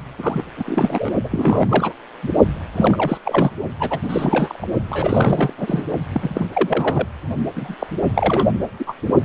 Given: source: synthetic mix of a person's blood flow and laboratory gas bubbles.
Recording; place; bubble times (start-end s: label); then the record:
Doppler ultrasound of blood flow; precordium
0.18-0.43 s: bubbles
0.56-0.64 s: bubbles
0.67-1.11 s: bubbles
1.24-1.67 s: bubbles
1.69-1.93 s: bubbles
2.22-2.28 s: bubbles
2.76-3.18 s: bubbles
3.24-3.51 s: bubbles
3.79-3.99 s: bubbles
4.03-4.67 s: bubbles
4.90-5.54 s: bubbles
5.58-5.83 s: bubbles
6.13-6.46 s: bubbles
6.53-7.08 s: bubbles
7.56-7.74 s: bubbles
7.79-7.87 s: bubbles
8.15-8.52 s: bubbles
8.79-8.94 s: bubbles
From the record:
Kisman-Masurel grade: 342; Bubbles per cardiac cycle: rolling drumbeat, 9 or more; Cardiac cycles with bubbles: 100%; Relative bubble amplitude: moderate (0.250 to 0.450); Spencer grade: 3 (all of the cardiac periods contain showers or single bubble signals, but not dominating or overriding the cardiac motion signals); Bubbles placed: only in the low amplitude regions of the cardiac cycle